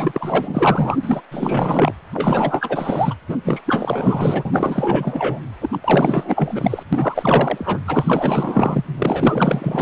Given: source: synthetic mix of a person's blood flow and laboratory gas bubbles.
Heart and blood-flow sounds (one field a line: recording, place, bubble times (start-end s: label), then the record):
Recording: Doppler ultrasound of blood flow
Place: precordium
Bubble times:
0.00-0.97 s: bubbles
1.03-1.21 s: bubbles
1.31-1.94 s: bubbles
2.14-3.15 s: bubbles
3.28-3.37 s: bubbles
3.45-3.61 s: bubbles
3.66-5.39 s: bubbles
5.61-5.68 s: bubbles
5.71-5.79 s: bubbles
5.84-6.83 s: bubbles
6.92-7.80 s: bubbles
7.86-8.85 s: bubbles
8.98-9.82 s: bubbles
From the record:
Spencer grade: 4 (maximum detectable bubble signal sounding continuously throughout systole and diastole of every cardiac period, and overriding the amplitude of the normal cardiac signals)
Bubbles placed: anywhere in the cardiac cycle